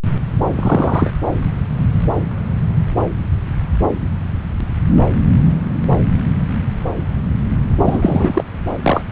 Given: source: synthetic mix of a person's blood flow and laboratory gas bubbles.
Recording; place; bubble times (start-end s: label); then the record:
Doppler ultrasound of blood flow; subclavian vein
0.56-1.11 s: bubbles
7.84-8.44 s: bubbles
8.82-9.04 s: bubbles
From the record:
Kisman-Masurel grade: 223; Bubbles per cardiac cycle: several, 3 to 8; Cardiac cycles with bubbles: 10 to 50%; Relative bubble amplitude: loud (0.450 to 0.775); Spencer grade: 2 (many but less than half of the cardiac periods contain bubble signals, singularly or in groups); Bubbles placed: anywhere in the cardiac cycle